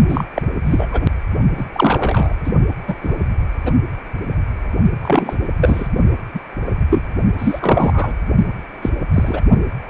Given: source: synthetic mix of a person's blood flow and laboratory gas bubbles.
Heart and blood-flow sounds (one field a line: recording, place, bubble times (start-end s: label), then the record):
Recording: Doppler ultrasound of blood flow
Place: precordium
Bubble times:
0.09-0.25 s: bubbles
0.35-0.43 s: bubbles
0.66-0.89 s: bubbles
0.91-1.05 s: bubbles
1.57-1.65 s: bubbles
1.72-2.35 s: bubbles
2.44-2.52 s: bubbles
2.88-2.95 s: bubbles
3.03-3.15 s: bubbles
3.65-3.73 s: bubbles
5.02-5.48 s: bubbles
5.61-5.86 s: bubbles
6.33-6.39 s: bubbles
6.66-6.71 s: bubbles
6.89-7.02 s: bubbles
7.38-8.12 s: bubbles
8.82-8.90 s: bubbles
9.12-9.41 s: bubbles
From the record:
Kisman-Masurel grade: 243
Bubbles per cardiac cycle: several, 3 to 8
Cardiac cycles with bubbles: 100%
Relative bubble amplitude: loud (0.450 to 0.775)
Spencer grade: 3 (all of the cardiac periods contain showers or single bubble signals, but not dominating or overriding the cardiac motion signals)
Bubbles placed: only in the low amplitude regions of the cardiac cycle